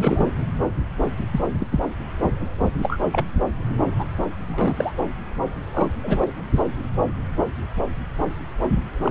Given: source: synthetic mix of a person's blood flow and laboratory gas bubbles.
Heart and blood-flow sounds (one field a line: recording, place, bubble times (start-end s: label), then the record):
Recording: Doppler ultrasound of blood flow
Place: subclavian vein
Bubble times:
0.00-0.28 s: bubbles
1.32-1.40 s: bubbles
1.59-1.67 s: bubbles
1.72-1.80 s: bubbles
2.82-2.98 s: bubbles
3.12-3.25 s: bubbles
3.98-4.04 s: bubbles
4.48-4.74 s: bubbles
4.76-4.92 s: bubbles
5.73-5.88 s: bubbles
6.02-6.32 s: bubbles
9.02-9.10 s: bubbles
From the record:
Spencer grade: 3 (all of the cardiac periods contain showers or single bubble signals, but not dominating or overriding the cardiac motion signals)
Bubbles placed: anywhere in the cardiac cycle